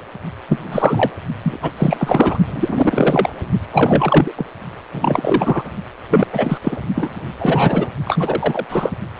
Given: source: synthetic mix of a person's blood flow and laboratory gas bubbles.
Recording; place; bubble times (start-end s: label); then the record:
Doppler ultrasound of blood flow; precordium
0.48-1.11 s: bubbles
1.43-1.59 s: bubbles
1.63-1.71 s: bubbles
1.77-2.38 s: bubbles
2.46-3.29 s: bubbles
3.73-4.32 s: bubbles
4.36-4.46 s: bubbles
4.92-5.62 s: bubbles
6.10-6.27 s: bubbles
6.33-6.58 s: bubbles
6.64-6.77 s: bubbles
6.95-7.30 s: bubbles
7.39-7.89 s: bubbles
8.05-8.65 s: bubbles
8.69-8.90 s: bubbles
From the record:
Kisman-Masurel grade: 343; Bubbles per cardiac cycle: rolling drumbeat, 9 or more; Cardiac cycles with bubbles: 100%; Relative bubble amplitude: loud (0.450 to 0.775); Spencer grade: 3 (all of the cardiac periods contain showers or single bubble signals, but not dominating or overriding the cardiac motion signals); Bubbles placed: only in the low amplitude regions of the cardiac cycle